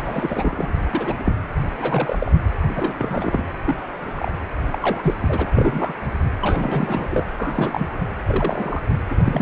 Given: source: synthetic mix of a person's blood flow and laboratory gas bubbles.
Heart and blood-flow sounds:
Doppler ultrasound of blood flow; precordium
0.06-0.73 s: bubbles
0.93-1.14 s: bubbles
1.18-1.41 s: bubbles
1.79-2.32 s: bubbles
2.67-2.93 s: bubbles
2.97-3.46 s: bubbles
3.65-3.75 s: bubbles
3.94-4.31 s: bubbles
4.71-5.15 s: bubbles
5.21-5.95 s: bubbles
6.39-7.23 s: bubbles
7.37-7.87 s: bubbles
8.28-8.83 s: bubbles
9.10-9.42 s: bubbles
From the record:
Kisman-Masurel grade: 242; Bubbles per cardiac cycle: several, 3 to 8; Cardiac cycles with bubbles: 100%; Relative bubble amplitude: moderate (0.250 to 0.450); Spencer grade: 3 (all of the cardiac periods contain showers or single bubble signals, but not dominating or overriding the cardiac motion signals); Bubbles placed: anywhere in the cardiac cycle

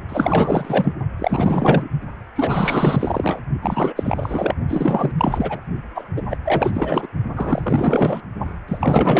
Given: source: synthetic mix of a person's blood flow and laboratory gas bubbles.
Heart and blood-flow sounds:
Doppler ultrasound of blood flow; precordium
0.09-0.93 s: bubbles
1.19-1.89 s: bubbles
2.35-3.40 s: bubbles
3.61-3.93 s: bubbles
3.96-4.54 s: bubbles
4.68-5.11 s: bubbles
5.17-5.60 s: bubbles
5.94-6.05 s: bubbles
6.15-6.22 s: bubbles
6.30-6.37 s: bubbles
6.45-7.07 s: bubbles
7.35-8.21 s: bubbles
8.68-9.20 s: bubbles
From the record:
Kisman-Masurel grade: 444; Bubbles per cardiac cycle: continuous sound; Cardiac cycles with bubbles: 100%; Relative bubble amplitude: maximal (0.775 to 0.999); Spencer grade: 4 (maximum detectable bubble signal sounding continuously throughout systole and diastole of every cardiac period, and overriding the amplitude of the normal cardiac signals); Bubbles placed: only in the low amplitude regions of the cardiac cycle

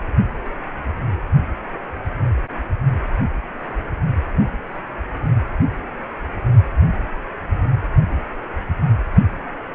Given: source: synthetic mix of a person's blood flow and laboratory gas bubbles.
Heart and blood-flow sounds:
Doppler ultrasound of blood flow; precordium
no bubbles
From the record:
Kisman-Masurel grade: 000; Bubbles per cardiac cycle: 0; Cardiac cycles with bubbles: 0%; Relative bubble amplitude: no bubbles discernible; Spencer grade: 0 (complete lack of bubble signals)

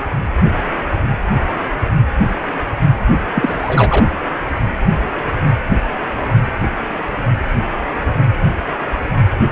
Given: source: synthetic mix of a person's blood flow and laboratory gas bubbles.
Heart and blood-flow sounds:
Doppler ultrasound of blood flow; precordium
3.34-4.06 s: bubbles
From the record:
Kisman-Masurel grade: 213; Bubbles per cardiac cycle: several, 3 to 8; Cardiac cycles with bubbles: 1 to 10%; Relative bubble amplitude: loud (0.450 to 0.775); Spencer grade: 1 (occasional bubble signal discernible with the cardiac motion signal, with majority of cardiac periods free of bubbles); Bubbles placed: anywhere in the cardiac cycle

